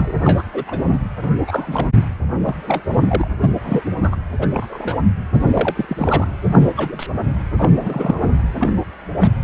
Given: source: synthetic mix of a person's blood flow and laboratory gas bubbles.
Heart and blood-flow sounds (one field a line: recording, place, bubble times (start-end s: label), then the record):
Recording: Doppler ultrasound of blood flow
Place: precordium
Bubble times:
0.00-0.12 s: bubbles
0.23-0.43 s: bubbles
0.53-0.64 s: bubbles
0.67-1.01 s: bubbles
1.21-1.35 s: bubbles
1.47-1.87 s: bubbles
2.43-2.56 s: bubbles
2.67-2.83 s: bubbles
3.08-3.27 s: bubbles
3.39-3.56 s: bubbles
3.64-3.82 s: bubbles
4.02-4.16 s: bubbles
4.39-4.47 s: bubbles
4.50-4.96 s: bubbles
5.33-5.85 s: bubbles
5.88-6.27 s: bubbles
6.53-6.72 s: bubbles
6.76-7.06 s: bubbles
7.13-7.18 s: bubbles
7.58-8.30 s: bubbles
8.58-8.73 s: bubbles
9.20-9.31 s: bubbles
From the record:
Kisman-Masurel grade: 242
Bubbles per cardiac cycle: several, 3 to 8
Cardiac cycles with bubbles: 100%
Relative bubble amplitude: moderate (0.250 to 0.450)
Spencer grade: 3 (all of the cardiac periods contain showers or single bubble signals, but not dominating or overriding the cardiac motion signals)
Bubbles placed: anywhere in the cardiac cycle